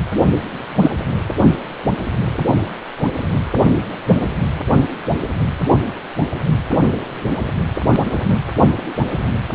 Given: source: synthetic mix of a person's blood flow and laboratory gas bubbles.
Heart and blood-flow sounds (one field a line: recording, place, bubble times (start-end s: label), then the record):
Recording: Doppler ultrasound of blood flow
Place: precordium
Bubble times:
0.81-0.91 s: bubbles
From the record:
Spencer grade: 1 (occasional bubble signal discernible with the cardiac motion signal, with majority of cardiac periods free of bubbles)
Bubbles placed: anywhere in the cardiac cycle